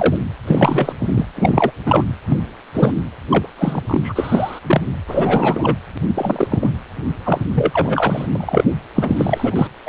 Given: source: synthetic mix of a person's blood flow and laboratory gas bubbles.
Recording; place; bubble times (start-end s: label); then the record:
Doppler ultrasound of blood flow; precordium
0.00-0.16 s: bubbles
0.47-0.92 s: bubbles
0.98-1.25 s: bubbles
1.37-1.71 s: bubbles
1.86-2.04 s: bubbles
2.26-2.38 s: bubbles
2.74-2.93 s: bubbles
3.30-3.47 s: bubbles
3.58-4.60 s: bubbles
4.67-4.81 s: bubbles
5.08-5.77 s: bubbles
6.14-6.70 s: bubbles
7.25-7.39 s: bubbles
7.54-8.28 s: bubbles
8.35-8.64 s: bubbles
8.95-9.68 s: bubbles
9.86-9.89 s: bubbles
From the record:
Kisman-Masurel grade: 243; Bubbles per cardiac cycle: several, 3 to 8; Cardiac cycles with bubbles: 100%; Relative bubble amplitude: loud (0.450 to 0.775); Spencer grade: 3 (all of the cardiac periods contain showers or single bubble signals, but not dominating or overriding the cardiac motion signals); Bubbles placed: anywhere in the cardiac cycle